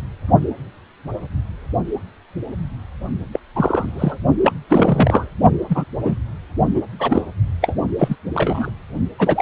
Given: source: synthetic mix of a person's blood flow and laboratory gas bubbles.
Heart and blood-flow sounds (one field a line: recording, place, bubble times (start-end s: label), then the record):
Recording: Doppler ultrasound of blood flow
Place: precordium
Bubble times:
3.33-3.40 s: bubbles
3.56-4.18 s: bubbles
4.41-4.52 s: bubbles
4.69-5.30 s: bubbles
5.69-5.84 s: bubbles
6.02-6.18 s: bubbles
6.75-6.80 s: bubbles
6.99-7.21 s: bubbles
7.62-7.75 s: bubbles
7.98-8.16 s: bubbles
8.34-8.70 s: bubbles
9.19-9.42 s: bubbles
From the record:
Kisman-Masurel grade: 233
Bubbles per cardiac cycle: several, 3 to 8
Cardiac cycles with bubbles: 50 to 99%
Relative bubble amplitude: loud (0.450 to 0.775)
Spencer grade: 3 (all of the cardiac periods contain showers or single bubble signals, but not dominating or overriding the cardiac motion signals)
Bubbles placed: only in the low amplitude regions of the cardiac cycle